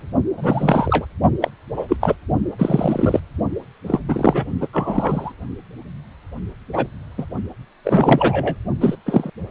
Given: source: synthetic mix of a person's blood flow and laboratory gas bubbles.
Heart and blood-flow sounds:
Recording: Doppler ultrasound of blood flow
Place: precordium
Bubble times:
0.00-0.07 s: bubbles
0.37-1.06 s: bubbles
1.42-1.51 s: bubbles
1.76-1.86 s: bubbles
1.88-1.97 s: bubbles
2.00-2.15 s: bubbles
2.58-3.20 s: bubbles
3.86-4.00 s: bubbles
4.08-4.46 s: bubbles
4.60-4.67 s: bubbles
4.72-5.32 s: bubbles
6.73-6.87 s: bubbles
7.17-7.25 s: bubbles
7.84-8.55 s: bubbles
8.80-8.96 s: bubbles
9.05-9.30 s: bubbles
From the record:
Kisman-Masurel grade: 243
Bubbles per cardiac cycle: several, 3 to 8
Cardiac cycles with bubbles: 100%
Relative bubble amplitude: loud (0.450 to 0.775)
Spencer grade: 3 (all of the cardiac periods contain showers or single bubble signals, but not dominating or overriding the cardiac motion signals)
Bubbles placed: only in the low amplitude regions of the cardiac cycle

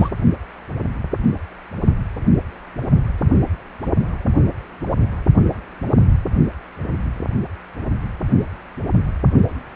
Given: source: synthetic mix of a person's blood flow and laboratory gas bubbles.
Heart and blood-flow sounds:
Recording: Doppler ultrasound of blood flow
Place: precordium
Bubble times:
0.00-0.10 s: bubbles
From the record:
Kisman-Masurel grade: 213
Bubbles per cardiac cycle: several, 3 to 8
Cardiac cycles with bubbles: 1 to 10%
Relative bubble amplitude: loud (0.450 to 0.775)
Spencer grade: 1 (occasional bubble signal discernible with the cardiac motion signal, with majority of cardiac periods free of bubbles)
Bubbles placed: only in the low amplitude regions of the cardiac cycle

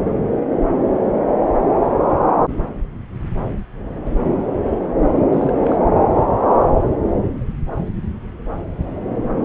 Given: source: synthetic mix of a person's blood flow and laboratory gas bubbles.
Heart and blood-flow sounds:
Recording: Doppler ultrasound of blood flow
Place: subclavian vein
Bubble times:
5.32-5.76 s: bubbles
From the record:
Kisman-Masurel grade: 211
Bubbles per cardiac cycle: several, 3 to 8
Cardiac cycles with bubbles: 1 to 10%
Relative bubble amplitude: barely perceptible (0.100 to 0.250)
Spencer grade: 1 (occasional bubble signal discernible with the cardiac motion signal, with majority of cardiac periods free of bubbles)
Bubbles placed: anywhere in the cardiac cycle

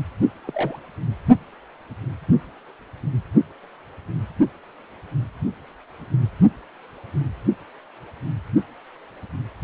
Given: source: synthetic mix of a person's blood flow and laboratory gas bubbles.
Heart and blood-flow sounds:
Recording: Doppler ultrasound of blood flow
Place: precordium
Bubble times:
0.44-0.77 s: bubbles
From the record:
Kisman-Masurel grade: 111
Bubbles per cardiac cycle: 1 to 2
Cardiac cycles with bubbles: 1 to 10%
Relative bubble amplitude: barely perceptible (0.100 to 0.250)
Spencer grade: 1 (occasional bubble signal discernible with the cardiac motion signal, with majority of cardiac periods free of bubbles)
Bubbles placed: only in the low amplitude regions of the cardiac cycle

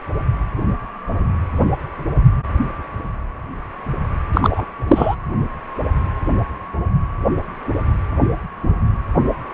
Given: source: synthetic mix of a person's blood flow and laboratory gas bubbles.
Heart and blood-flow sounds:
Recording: Doppler ultrasound of blood flow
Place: precordium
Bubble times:
4.33-4.64 s: bubbles
4.88-5.15 s: bubbles
From the record:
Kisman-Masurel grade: 213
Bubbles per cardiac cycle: several, 3 to 8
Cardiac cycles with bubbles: 1 to 10%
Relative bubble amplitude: loud (0.450 to 0.775)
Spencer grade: 1 (occasional bubble signal discernible with the cardiac motion signal, with majority of cardiac periods free of bubbles)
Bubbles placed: anywhere in the cardiac cycle

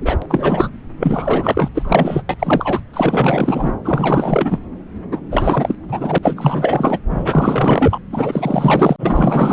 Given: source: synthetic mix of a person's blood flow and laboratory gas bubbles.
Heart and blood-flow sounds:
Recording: Doppler ultrasound of blood flow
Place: subclavian vein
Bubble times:
0.00-0.18 s: bubbles
0.22-0.26 s: bubbles
0.29-0.70 s: bubbles
1.00-1.69 s: bubbles
1.74-2.22 s: bubbles
2.29-2.35 s: bubbles
2.39-2.81 s: bubbles
2.93-3.75 s: bubbles
3.84-4.59 s: bubbles
5.12-5.21 s: bubbles
5.31-5.78 s: bubbles
5.88-6.18 s: bubbles
6.22-6.99 s: bubbles
7.10-7.98 s: bubbles
8.12-9.53 s: bubbles
From the record:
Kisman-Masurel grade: 444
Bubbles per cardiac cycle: continuous sound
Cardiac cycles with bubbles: 100%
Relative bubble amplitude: maximal (0.775 to 0.999)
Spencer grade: 4 (maximum detectable bubble signal sounding continuously throughout systole and diastole of every cardiac period, and overriding the amplitude of the normal cardiac signals)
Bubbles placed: anywhere in the cardiac cycle

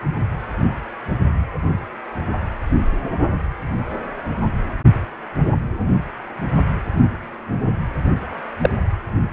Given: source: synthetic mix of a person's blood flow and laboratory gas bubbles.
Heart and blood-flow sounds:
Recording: Doppler ultrasound of blood flow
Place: precordium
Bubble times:
8.61-8.70 s: bubbles
From the record:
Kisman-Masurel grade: 113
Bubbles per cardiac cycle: 1 to 2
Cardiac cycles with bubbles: 1 to 10%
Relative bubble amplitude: loud (0.450 to 0.775)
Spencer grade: 1 (occasional bubble signal discernible with the cardiac motion signal, with majority of cardiac periods free of bubbles)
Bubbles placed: anywhere in the cardiac cycle

